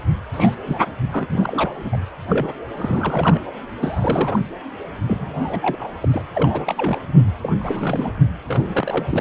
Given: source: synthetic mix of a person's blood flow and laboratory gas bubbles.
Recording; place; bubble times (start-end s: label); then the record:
Doppler ultrasound of blood flow; precordium
0.34-0.55 s: bubbles
0.65-0.78 s: bubbles
1.11-1.98 s: bubbles
2.29-2.52 s: bubbles
2.73-3.44 s: bubbles
3.80-4.39 s: bubbles
5.07-6.24 s: bubbles
6.34-6.75 s: bubbles
6.77-6.99 s: bubbles
7.15-7.24 s: bubbles
7.42-7.53 s: bubbles
7.59-8.16 s: bubbles
8.48-9.06 s: bubbles
9.11-9.21 s: bubbles
From the record:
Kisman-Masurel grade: 342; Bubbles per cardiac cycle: rolling drumbeat, 9 or more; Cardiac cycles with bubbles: 100%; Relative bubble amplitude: moderate (0.250 to 0.450); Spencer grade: 3 (all of the cardiac periods contain showers or single bubble signals, but not dominating or overriding the cardiac motion signals); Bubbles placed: anywhere in the cardiac cycle